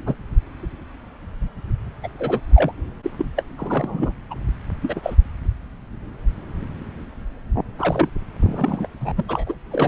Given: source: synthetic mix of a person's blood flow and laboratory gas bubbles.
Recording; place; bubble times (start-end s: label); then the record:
Doppler ultrasound of blood flow; subclavian vein
0.06-0.14 s: bubbles
2.03-2.08 s: bubbles
2.19-2.40 s: bubbles
2.54-2.72 s: bubbles
3.03-3.10 s: bubbles
3.18-3.26 s: bubbles
3.37-3.43 s: bubbles
3.58-4.12 s: bubbles
4.30-4.34 s: bubbles
4.82-5.00 s: bubbles
5.03-5.14 s: bubbles
7.79-8.08 s: bubbles
8.40-8.87 s: bubbles
9.00-9.13 s: bubbles
9.17-9.26 s: bubbles
9.28-9.55 s: bubbles
9.71-9.88 s: bubbles
From the record:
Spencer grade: 3 (all of the cardiac periods contain showers or single bubble signals, but not dominating or overriding the cardiac motion signals); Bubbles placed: anywhere in the cardiac cycle